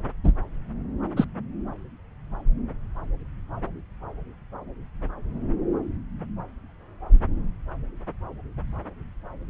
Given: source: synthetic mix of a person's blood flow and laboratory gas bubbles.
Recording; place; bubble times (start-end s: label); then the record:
Doppler ultrasound of blood flow; subclavian vein
0.23-0.33 s: bubbles
1.16-1.25 s: bubbles
From the record:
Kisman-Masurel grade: 122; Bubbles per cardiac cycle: 1 to 2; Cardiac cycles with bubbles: 10 to 50%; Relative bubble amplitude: moderate (0.250 to 0.450); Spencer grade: 2 (many but less than half of the cardiac periods contain bubble signals, singularly or in groups); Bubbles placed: anywhere in the cardiac cycle